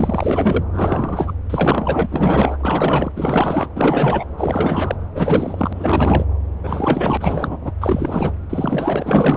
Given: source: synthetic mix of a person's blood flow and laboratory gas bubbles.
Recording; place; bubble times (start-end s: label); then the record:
Doppler ultrasound of blood flow; subclavian vein
0.00-0.64 s: bubbles
0.73-1.34 s: bubbles
1.50-2.06 s: bubbles
2.10-2.57 s: bubbles
2.60-3.12 s: bubbles
3.16-3.68 s: bubbles
3.75-4.26 s: bubbles
4.37-4.96 s: bubbles
5.15-6.25 s: bubbles
6.63-7.17 s: bubbles
7.20-7.58 s: bubbles
7.62-7.72 s: bubbles
7.81-8.32 s: bubbles
8.49-9.37 s: bubbles
From the record:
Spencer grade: 4 (maximum detectable bubble signal sounding continuously throughout systole and diastole of every cardiac period, and overriding the amplitude of the normal cardiac signals); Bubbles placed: anywhere in the cardiac cycle